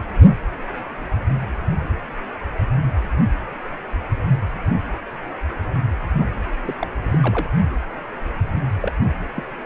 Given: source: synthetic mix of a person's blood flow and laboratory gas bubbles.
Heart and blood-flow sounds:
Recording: Doppler ultrasound of blood flow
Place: precordium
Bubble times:
6.12-6.28 s: bubbles
6.65-6.75 s: bubbles
6.80-6.88 s: bubbles
7.03-7.19 s: bubbles
7.22-7.49 s: bubbles
8.80-8.92 s: bubbles
9.36-9.43 s: bubbles
From the record:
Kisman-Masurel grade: 221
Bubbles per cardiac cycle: several, 3 to 8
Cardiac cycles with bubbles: 10 to 50%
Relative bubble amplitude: barely perceptible (0.100 to 0.250)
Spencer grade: 2 (many but less than half of the cardiac periods contain bubble signals, singularly or in groups)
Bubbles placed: anywhere in the cardiac cycle

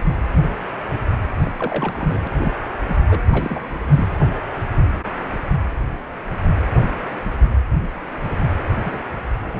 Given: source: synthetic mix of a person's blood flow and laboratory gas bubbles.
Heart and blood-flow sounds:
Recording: Doppler ultrasound of blood flow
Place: precordium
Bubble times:
1.37-1.51 s: bubbles
1.57-2.27 s: bubbles
2.36-2.52 s: bubbles
2.88-2.99 s: bubbles
3.08-3.21 s: bubbles
3.29-3.60 s: bubbles
3.92-4.08 s: bubbles
8.82-9.01 s: bubbles
9.42-9.60 s: bubbles
From the record:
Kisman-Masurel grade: 222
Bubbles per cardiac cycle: several, 3 to 8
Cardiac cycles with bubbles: 10 to 50%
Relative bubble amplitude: moderate (0.250 to 0.450)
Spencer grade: 2 (many but less than half of the cardiac periods contain bubble signals, singularly or in groups)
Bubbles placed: anywhere in the cardiac cycle

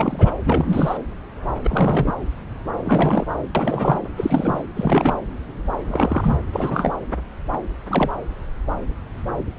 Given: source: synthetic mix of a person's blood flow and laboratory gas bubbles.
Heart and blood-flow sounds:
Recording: Doppler ultrasound of blood flow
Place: subclavian vein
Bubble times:
0.00-0.32 s: bubbles
0.44-0.97 s: bubbles
1.64-2.11 s: bubbles
2.85-3.25 s: bubbles
3.54-4.01 s: bubbles
4.17-4.62 s: bubbles
4.76-5.13 s: bubbles
5.87-6.43 s: bubbles
6.53-7.00 s: bubbles
7.89-8.11 s: bubbles
From the record:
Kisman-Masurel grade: 232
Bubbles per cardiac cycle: several, 3 to 8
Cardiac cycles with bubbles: 50 to 99%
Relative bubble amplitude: moderate (0.250 to 0.450)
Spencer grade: 3 (all of the cardiac periods contain showers or single bubble signals, but not dominating or overriding the cardiac motion signals)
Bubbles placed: anywhere in the cardiac cycle

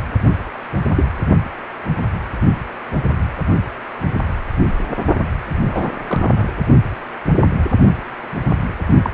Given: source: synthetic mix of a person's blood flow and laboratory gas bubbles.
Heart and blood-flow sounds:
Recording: Doppler ultrasound of blood flow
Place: precordium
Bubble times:
0.95-1.05 s: bubbles
5.65-5.91 s: bubbles
6.08-6.50 s: bubbles
9.02-9.10 s: bubbles
From the record:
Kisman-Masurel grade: 122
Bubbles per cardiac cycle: 1 to 2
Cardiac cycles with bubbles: 10 to 50%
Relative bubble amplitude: moderate (0.250 to 0.450)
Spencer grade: 2 (many but less than half of the cardiac periods contain bubble signals, singularly or in groups)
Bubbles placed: only in the low amplitude regions of the cardiac cycle

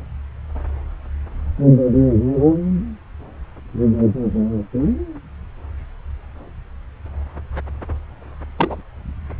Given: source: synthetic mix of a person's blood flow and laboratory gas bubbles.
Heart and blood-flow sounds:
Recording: Doppler ultrasound of blood flow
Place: subclavian vein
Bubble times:
8.57-8.81 s: bubbles
From the record:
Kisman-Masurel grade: 112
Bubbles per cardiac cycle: 1 to 2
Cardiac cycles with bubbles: 1 to 10%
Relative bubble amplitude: moderate (0.250 to 0.450)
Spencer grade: 1 (occasional bubble signal discernible with the cardiac motion signal, with majority of cardiac periods free of bubbles)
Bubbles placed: anywhere in the cardiac cycle

